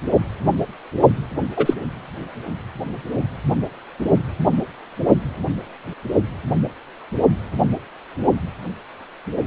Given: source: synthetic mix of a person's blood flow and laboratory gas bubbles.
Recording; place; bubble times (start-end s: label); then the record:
Doppler ultrasound of blood flow; precordium
1.57-1.74 s: bubbles
From the record:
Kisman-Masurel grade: 123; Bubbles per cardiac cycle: 1 to 2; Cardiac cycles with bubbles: 10 to 50%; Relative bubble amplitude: loud (0.450 to 0.775); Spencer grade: 2 (many but less than half of the cardiac periods contain bubble signals, singularly or in groups); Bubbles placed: only in the low amplitude regions of the cardiac cycle